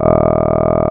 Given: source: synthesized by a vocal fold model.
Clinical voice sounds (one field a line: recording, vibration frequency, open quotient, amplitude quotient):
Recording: sustained vowel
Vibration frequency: 40 Hz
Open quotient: 0.2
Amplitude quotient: 1.4